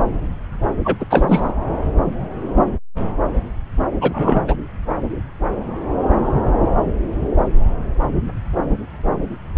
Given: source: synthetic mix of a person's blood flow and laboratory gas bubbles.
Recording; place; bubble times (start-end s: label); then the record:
Doppler ultrasound of blood flow; subclavian vein
0.84-1.05 s: bubbles
1.10-1.52 s: bubbles
4.00-4.56 s: bubbles
From the record:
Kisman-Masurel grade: 223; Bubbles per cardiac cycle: several, 3 to 8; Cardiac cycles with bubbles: 10 to 50%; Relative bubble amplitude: loud (0.450 to 0.775); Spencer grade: 2 (many but less than half of the cardiac periods contain bubble signals, singularly or in groups); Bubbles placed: anywhere in the cardiac cycle